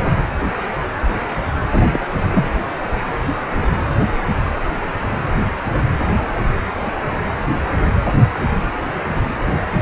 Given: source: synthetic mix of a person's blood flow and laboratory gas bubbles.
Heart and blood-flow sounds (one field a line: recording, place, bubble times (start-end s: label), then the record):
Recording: Doppler ultrasound of blood flow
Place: precordium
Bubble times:
1.71-2.01 s: bubbles
2.31-2.50 s: bubbles
From the record:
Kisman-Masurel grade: 212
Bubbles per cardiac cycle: several, 3 to 8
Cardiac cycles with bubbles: 1 to 10%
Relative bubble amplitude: moderate (0.250 to 0.450)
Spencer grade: 1 (occasional bubble signal discernible with the cardiac motion signal, with majority of cardiac periods free of bubbles)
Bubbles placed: anywhere in the cardiac cycle